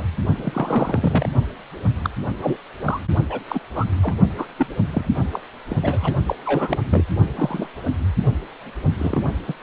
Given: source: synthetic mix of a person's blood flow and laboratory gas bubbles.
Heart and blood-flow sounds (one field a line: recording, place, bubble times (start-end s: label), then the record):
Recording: Doppler ultrasound of blood flow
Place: precordium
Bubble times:
0.00-0.10 s: bubbles
0.12-0.17 s: bubbles
0.37-1.29 s: bubbles
2.04-2.10 s: bubbles
2.41-2.57 s: bubbles
2.84-3.00 s: bubbles
3.29-3.40 s: bubbles
3.48-3.59 s: bubbles
3.75-3.84 s: bubbles
4.02-4.16 s: bubbles
4.37-4.46 s: bubbles
4.58-4.67 s: bubbles
4.92-5.09 s: bubbles
5.31-5.41 s: bubbles
5.69-6.12 s: bubbles
6.26-6.35 s: bubbles
6.45-6.79 s: bubbles
6.90-7.04 s: bubbles
7.36-7.67 s: bubbles
7.85-7.95 s: bubbles
8.98-9.22 s: bubbles
9.47-9.54 s: bubbles
From the record:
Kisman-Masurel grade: 242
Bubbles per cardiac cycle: several, 3 to 8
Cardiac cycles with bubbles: 100%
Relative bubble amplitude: moderate (0.250 to 0.450)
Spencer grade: 3 (all of the cardiac periods contain showers or single bubble signals, but not dominating or overriding the cardiac motion signals)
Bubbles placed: only in the low amplitude regions of the cardiac cycle